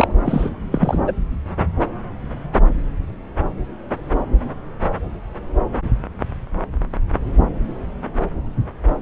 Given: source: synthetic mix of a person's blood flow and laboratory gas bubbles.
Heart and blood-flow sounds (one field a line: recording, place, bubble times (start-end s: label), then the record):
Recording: Doppler ultrasound of blood flow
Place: subclavian vein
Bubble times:
0.00-0.08 s: bubbles
0.25-0.49 s: bubbles
0.72-0.99 s: bubbles
1.07-1.12 s: bubbles
From the record:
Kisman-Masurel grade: 213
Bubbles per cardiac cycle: several, 3 to 8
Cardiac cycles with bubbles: 1 to 10%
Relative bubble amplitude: loud (0.450 to 0.775)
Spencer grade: 1 (occasional bubble signal discernible with the cardiac motion signal, with majority of cardiac periods free of bubbles)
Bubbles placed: anywhere in the cardiac cycle